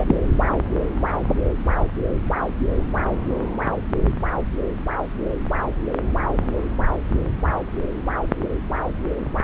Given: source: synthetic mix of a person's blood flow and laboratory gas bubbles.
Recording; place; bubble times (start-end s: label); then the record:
Doppler ultrasound of blood flow; subclavian vein
0.00-0.04 s: bubbles
0.07-0.15 s: bubbles
From the record:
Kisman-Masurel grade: 213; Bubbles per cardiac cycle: several, 3 to 8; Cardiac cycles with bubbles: 1 to 10%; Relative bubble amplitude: loud (0.450 to 0.775); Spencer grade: 1 (occasional bubble signal discernible with the cardiac motion signal, with majority of cardiac periods free of bubbles); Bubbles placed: anywhere in the cardiac cycle